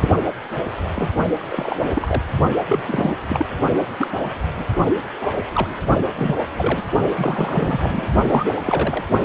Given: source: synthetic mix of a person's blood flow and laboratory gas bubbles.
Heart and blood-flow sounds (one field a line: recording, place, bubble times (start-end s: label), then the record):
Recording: Doppler ultrasound of blood flow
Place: precordium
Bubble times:
0.00-0.11 s: bubbles
0.96-1.10 s: bubbles
1.38-1.90 s: bubbles
1.95-2.23 s: bubbles
2.68-3.15 s: bubbles
3.28-3.46 s: bubbles
3.99-4.09 s: bubbles
4.54-4.64 s: bubbles
5.20-5.41 s: bubbles
5.54-5.67 s: bubbles
6.16-6.36 s: bubbles
6.58-6.83 s: bubbles
7.17-8.06 s: bubbles
8.27-9.04 s: bubbles
From the record:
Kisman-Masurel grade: 242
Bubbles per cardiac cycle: several, 3 to 8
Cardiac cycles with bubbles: 100%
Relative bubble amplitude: moderate (0.250 to 0.450)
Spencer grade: 3 (all of the cardiac periods contain showers or single bubble signals, but not dominating or overriding the cardiac motion signals)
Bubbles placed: only in the low amplitude regions of the cardiac cycle